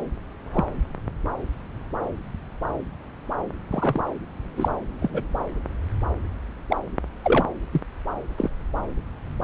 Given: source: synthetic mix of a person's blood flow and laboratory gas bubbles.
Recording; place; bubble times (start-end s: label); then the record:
Doppler ultrasound of blood flow; subclavian vein
0.54-0.65 s: bubbles
3.70-4.00 s: bubbles
4.56-4.68 s: bubbles
5.00-5.22 s: bubbles
6.70-6.76 s: bubbles
7.24-7.45 s: bubbles
7.71-7.81 s: bubbles
8.38-8.49 s: bubbles
From the record:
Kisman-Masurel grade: 122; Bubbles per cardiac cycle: 1 to 2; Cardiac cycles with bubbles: 10 to 50%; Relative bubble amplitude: moderate (0.250 to 0.450); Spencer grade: 2 (many but less than half of the cardiac periods contain bubble signals, singularly or in groups); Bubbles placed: anywhere in the cardiac cycle